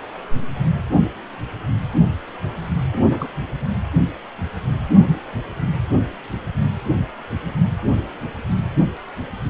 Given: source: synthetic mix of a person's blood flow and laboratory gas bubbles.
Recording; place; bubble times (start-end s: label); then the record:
Doppler ultrasound of blood flow; precordium
2.92-3.27 s: bubbles
From the record:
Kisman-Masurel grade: 111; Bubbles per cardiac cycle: 1 to 2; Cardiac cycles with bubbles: 1 to 10%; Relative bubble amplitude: barely perceptible (0.100 to 0.250); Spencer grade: 1 (occasional bubble signal discernible with the cardiac motion signal, with majority of cardiac periods free of bubbles); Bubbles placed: anywhere in the cardiac cycle